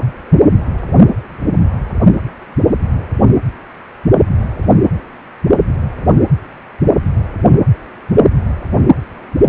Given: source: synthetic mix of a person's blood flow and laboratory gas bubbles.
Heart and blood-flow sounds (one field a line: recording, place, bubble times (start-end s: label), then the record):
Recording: Doppler ultrasound of blood flow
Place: precordium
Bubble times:
no bubbles
From the record:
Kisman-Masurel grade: 000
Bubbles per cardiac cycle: 0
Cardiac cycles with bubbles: 0%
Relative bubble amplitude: no bubbles discernible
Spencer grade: 0 (complete lack of bubble signals)